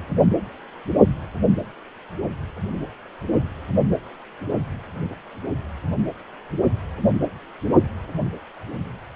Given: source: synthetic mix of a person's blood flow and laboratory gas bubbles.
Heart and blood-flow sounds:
Doppler ultrasound of blood flow; precordium
no bubbles
From the record:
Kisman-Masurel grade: 000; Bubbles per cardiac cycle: 0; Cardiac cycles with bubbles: 0%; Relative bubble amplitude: no bubbles discernible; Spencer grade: 0 (complete lack of bubble signals)

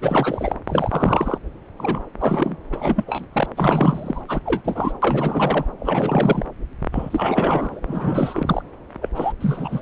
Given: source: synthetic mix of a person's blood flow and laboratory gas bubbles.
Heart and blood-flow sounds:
Doppler ultrasound of blood flow; subclavian vein
0.00-0.54 s: bubbles
0.67-1.38 s: bubbles
1.78-2.02 s: bubbles
2.20-2.56 s: bubbles
2.72-3.04 s: bubbles
3.08-3.26 s: bubbles
3.33-3.46 s: bubbles
3.56-4.22 s: bubbles
4.28-4.41 s: bubbles
4.46-4.62 s: bubbles
4.64-4.92 s: bubbles
5.02-5.66 s: bubbles
5.79-6.45 s: bubbles
6.92-7.80 s: bubbles
7.83-8.61 s: bubbles
9.01-9.08 s: bubbles
9.15-9.32 s: bubbles
9.40-9.82 s: bubbles
From the record:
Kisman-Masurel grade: 342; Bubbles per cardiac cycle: rolling drumbeat, 9 or more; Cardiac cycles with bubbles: 100%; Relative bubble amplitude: moderate (0.250 to 0.450); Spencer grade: 3 (all of the cardiac periods contain showers or single bubble signals, but not dominating or overriding the cardiac motion signals); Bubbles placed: anywhere in the cardiac cycle

